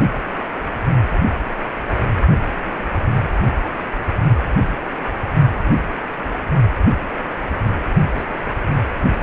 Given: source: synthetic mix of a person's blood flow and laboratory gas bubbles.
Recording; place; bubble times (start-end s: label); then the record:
Doppler ultrasound of blood flow; precordium
2.63-2.84 s: bubbles
3.11-3.29 s: bubbles
5.69-5.82 s: bubbles
5.85-5.89 s: bubbles
8.15-8.40 s: bubbles
From the record:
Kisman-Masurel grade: 121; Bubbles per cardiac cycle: 1 to 2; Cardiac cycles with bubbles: 10 to 50%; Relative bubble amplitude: barely perceptible (0.100 to 0.250); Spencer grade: 2 (many but less than half of the cardiac periods contain bubble signals, singularly or in groups); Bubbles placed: only in the low amplitude regions of the cardiac cycle